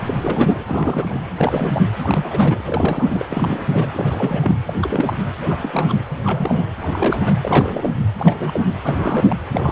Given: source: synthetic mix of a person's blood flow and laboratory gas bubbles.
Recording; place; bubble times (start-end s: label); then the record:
Doppler ultrasound of blood flow; precordium
0.02-1.20 s: bubbles
1.36-1.82 s: bubbles
1.97-3.25 s: bubbles
3.29-3.88 s: bubbles
3.94-4.59 s: bubbles
4.67-4.74 s: bubbles
4.81-5.15 s: bubbles
5.42-6.04 s: bubbles
6.24-6.67 s: bubbles
6.81-7.34 s: bubbles
7.43-7.93 s: bubbles
8.18-8.66 s: bubbles
8.83-9.36 s: bubbles
9.52-9.72 s: bubbles
From the record:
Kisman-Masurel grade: 342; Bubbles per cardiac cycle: rolling drumbeat, 9 or more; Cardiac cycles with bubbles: 100%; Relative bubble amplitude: moderate (0.250 to 0.450); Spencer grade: 3 (all of the cardiac periods contain showers or single bubble signals, but not dominating or overriding the cardiac motion signals); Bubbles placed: anywhere in the cardiac cycle